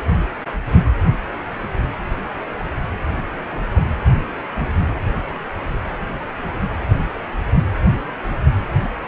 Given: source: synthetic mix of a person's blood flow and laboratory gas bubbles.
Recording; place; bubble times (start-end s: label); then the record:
Doppler ultrasound of blood flow; precordium
3.49-3.63 s: bubbles
3.77-3.81 s: bubbles
From the record:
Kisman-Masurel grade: 111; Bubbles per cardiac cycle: 1 to 2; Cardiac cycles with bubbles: 1 to 10%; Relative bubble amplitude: barely perceptible (0.100 to 0.250); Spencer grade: 1 (occasional bubble signal discernible with the cardiac motion signal, with majority of cardiac periods free of bubbles); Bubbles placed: anywhere in the cardiac cycle